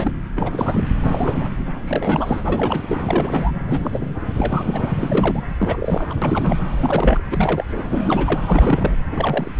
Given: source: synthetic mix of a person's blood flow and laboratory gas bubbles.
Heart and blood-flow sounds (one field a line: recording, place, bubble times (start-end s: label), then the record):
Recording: Doppler ultrasound of blood flow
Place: subclavian vein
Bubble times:
0.00-0.11 s: bubbles
0.36-0.89 s: bubbles
1.04-1.50 s: bubbles
1.84-2.81 s: bubbles
2.88-2.98 s: bubbles
3.08-3.52 s: bubbles
3.67-4.14 s: bubbles
4.37-5.43 s: bubbles
5.58-6.07 s: bubbles
6.09-6.13 s: bubbles
6.21-6.59 s: bubbles
6.76-7.21 s: bubbles
7.31-7.64 s: bubbles
7.68-7.87 s: bubbles
7.89-8.40 s: bubbles
8.48-8.95 s: bubbles
9.12-9.51 s: bubbles
From the record:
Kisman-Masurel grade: 342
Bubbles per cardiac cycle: rolling drumbeat, 9 or more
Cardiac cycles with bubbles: 100%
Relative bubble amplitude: moderate (0.250 to 0.450)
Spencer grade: 3 (all of the cardiac periods contain showers or single bubble signals, but not dominating or overriding the cardiac motion signals)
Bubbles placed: anywhere in the cardiac cycle